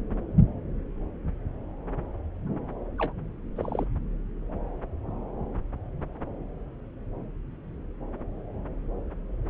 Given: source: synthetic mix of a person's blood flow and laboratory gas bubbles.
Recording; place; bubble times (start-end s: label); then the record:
Doppler ultrasound of blood flow; subclavian vein
2.98-3.12 s: bubbles
3.56-3.85 s: bubbles
From the record:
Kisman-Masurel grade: 211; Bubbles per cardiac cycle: several, 3 to 8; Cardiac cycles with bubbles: 1 to 10%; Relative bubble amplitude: barely perceptible (0.100 to 0.250); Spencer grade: 1 (occasional bubble signal discernible with the cardiac motion signal, with majority of cardiac periods free of bubbles); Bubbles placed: anywhere in the cardiac cycle